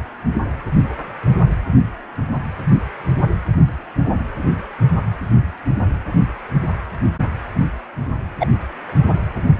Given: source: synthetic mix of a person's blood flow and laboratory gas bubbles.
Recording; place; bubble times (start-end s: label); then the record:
Doppler ultrasound of blood flow; precordium
8.40-8.47 s: bubbles
From the record:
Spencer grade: 1 (occasional bubble signal discernible with the cardiac motion signal, with majority of cardiac periods free of bubbles); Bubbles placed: anywhere in the cardiac cycle